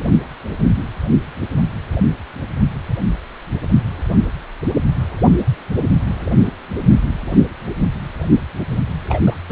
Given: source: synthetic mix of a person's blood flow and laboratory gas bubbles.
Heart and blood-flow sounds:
Doppler ultrasound of blood flow; precordium
9.09-9.17 s: bubbles
9.26-9.35 s: bubbles
9.49-9.52 s: bubbles
From the record:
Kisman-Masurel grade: 223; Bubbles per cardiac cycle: several, 3 to 8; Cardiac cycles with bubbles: 10 to 50%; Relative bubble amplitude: loud (0.450 to 0.775); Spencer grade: 2 (many but less than half of the cardiac periods contain bubble signals, singularly or in groups); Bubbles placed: anywhere in the cardiac cycle

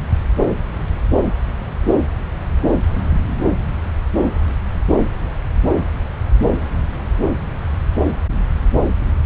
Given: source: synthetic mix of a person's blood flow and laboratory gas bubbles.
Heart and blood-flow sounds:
Doppler ultrasound of blood flow; subclavian vein
no bubbles
From the record:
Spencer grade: 0 (complete lack of bubble signals)

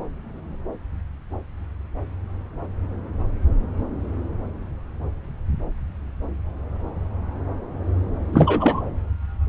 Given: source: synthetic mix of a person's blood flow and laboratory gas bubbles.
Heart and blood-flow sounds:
Doppler ultrasound of blood flow; subclavian vein
8.32-8.92 s: bubbles
From the record:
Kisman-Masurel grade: 213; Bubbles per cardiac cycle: several, 3 to 8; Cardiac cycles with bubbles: 1 to 10%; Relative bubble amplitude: loud (0.450 to 0.775); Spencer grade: 1 (occasional bubble signal discernible with the cardiac motion signal, with majority of cardiac periods free of bubbles); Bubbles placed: anywhere in the cardiac cycle

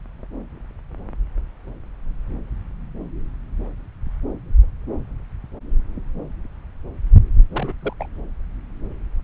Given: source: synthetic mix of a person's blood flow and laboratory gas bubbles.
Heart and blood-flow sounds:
Doppler ultrasound of blood flow; subclavian vein
7.54-7.72 s: bubbles
7.81-7.93 s: bubbles
7.99-8.06 s: bubbles
From the record:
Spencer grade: 1 (occasional bubble signal discernible with the cardiac motion signal, with majority of cardiac periods free of bubbles); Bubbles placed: anywhere in the cardiac cycle

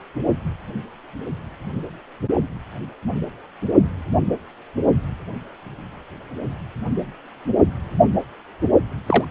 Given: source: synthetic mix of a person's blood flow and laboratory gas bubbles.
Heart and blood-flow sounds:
Doppler ultrasound of blood flow; precordium
9.06-9.25 s: bubbles
From the record:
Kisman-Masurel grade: 123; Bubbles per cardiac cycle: 1 to 2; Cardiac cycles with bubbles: 10 to 50%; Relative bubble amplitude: loud (0.450 to 0.775); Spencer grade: 2 (many but less than half of the cardiac periods contain bubble signals, singularly or in groups); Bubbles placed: only in the low amplitude regions of the cardiac cycle

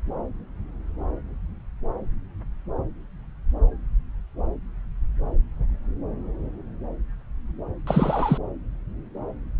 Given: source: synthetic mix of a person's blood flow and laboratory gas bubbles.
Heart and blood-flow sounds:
Doppler ultrasound of blood flow; subclavian vein
7.87-8.38 s: bubbles
From the record:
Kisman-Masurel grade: 112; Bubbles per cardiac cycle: 1 to 2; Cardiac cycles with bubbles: 1 to 10%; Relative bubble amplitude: moderate (0.250 to 0.450); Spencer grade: 1 (occasional bubble signal discernible with the cardiac motion signal, with majority of cardiac periods free of bubbles); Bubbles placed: anywhere in the cardiac cycle

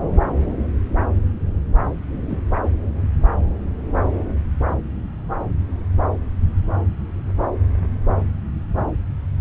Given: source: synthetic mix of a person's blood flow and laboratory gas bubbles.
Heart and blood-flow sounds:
Doppler ultrasound of blood flow; subclavian vein
2.29-2.40 s: bubbles
From the record:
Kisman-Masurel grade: 113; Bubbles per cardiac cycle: 1 to 2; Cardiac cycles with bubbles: 1 to 10%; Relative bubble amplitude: loud (0.450 to 0.775); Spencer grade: 1 (occasional bubble signal discernible with the cardiac motion signal, with majority of cardiac periods free of bubbles); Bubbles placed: anywhere in the cardiac cycle

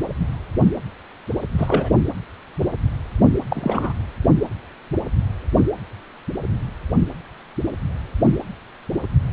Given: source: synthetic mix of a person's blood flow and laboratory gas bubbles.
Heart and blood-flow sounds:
Doppler ultrasound of blood flow; precordium
1.57-1.89 s: bubbles
3.50-3.92 s: bubbles
9.29-9.33 s: bubbles
From the record:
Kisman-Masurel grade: 222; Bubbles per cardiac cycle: several, 3 to 8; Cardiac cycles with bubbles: 10 to 50%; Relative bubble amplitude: moderate (0.250 to 0.450); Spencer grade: 2 (many but less than half of the cardiac periods contain bubble signals, singularly or in groups); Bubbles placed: anywhere in the cardiac cycle

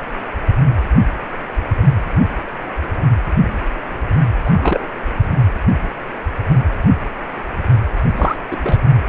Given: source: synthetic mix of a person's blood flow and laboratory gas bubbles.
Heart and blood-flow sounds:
Doppler ultrasound of blood flow; precordium
4.45-4.86 s: bubbles
8.16-8.36 s: bubbles
8.51-8.56 s: bubbles
8.62-8.80 s: bubbles
From the record:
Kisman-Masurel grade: 222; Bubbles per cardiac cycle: several, 3 to 8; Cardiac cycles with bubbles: 10 to 50%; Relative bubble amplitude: moderate (0.250 to 0.450); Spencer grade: 2 (many but less than half of the cardiac periods contain bubble signals, singularly or in groups); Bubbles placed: anywhere in the cardiac cycle

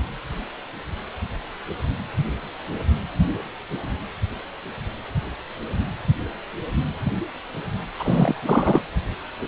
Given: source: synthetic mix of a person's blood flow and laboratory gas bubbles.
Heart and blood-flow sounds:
Doppler ultrasound of blood flow; precordium
7.99-8.82 s: bubbles
From the record:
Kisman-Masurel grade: 212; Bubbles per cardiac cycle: several, 3 to 8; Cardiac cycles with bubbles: 1 to 10%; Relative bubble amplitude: moderate (0.250 to 0.450); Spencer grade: 1 (occasional bubble signal discernible with the cardiac motion signal, with majority of cardiac periods free of bubbles); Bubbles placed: anywhere in the cardiac cycle

